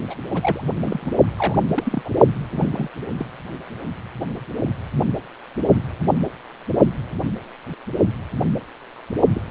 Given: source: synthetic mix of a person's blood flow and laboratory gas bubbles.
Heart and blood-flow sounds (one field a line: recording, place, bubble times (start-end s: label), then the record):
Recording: Doppler ultrasound of blood flow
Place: precordium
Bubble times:
0.10-0.14 s: bubbles
0.28-0.63 s: bubbles
0.85-1.11 s: bubbles
1.38-1.56 s: bubbles
1.74-2.02 s: bubbles
2.04-2.10 s: bubbles
2.52-2.88 s: bubbles
3.17-3.26 s: bubbles
9.34-9.45 s: bubbles
From the record:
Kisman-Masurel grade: 221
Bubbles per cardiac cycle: several, 3 to 8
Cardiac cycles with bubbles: 10 to 50%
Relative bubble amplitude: barely perceptible (0.100 to 0.250)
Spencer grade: 2 (many but less than half of the cardiac periods contain bubble signals, singularly or in groups)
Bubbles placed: only in the low amplitude regions of the cardiac cycle